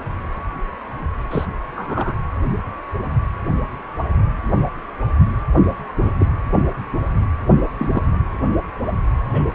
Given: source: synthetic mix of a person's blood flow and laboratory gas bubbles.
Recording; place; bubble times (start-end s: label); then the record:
Doppler ultrasound of blood flow; precordium
1.30-1.46 s: bubbles
1.75-2.17 s: bubbles
6.00-6.10 s: bubbles
6.19-6.26 s: bubbles
7.79-8.02 s: bubbles
9.32-9.48 s: bubbles
From the record:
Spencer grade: 2 (many but less than half of the cardiac periods contain bubble signals, singularly or in groups); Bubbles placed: anywhere in the cardiac cycle